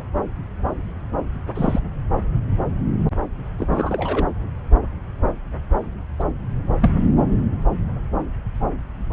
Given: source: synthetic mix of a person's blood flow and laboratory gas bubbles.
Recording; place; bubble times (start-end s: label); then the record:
Doppler ultrasound of blood flow; subclavian vein
1.55-1.80 s: bubbles
3.58-4.26 s: bubbles
6.19-6.23 s: bubbles
6.80-6.91 s: bubbles
From the record:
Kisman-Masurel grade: 123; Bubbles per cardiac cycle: 1 to 2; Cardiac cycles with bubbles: 10 to 50%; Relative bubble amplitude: loud (0.450 to 0.775); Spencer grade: 2 (many but less than half of the cardiac periods contain bubble signals, singularly or in groups); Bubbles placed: anywhere in the cardiac cycle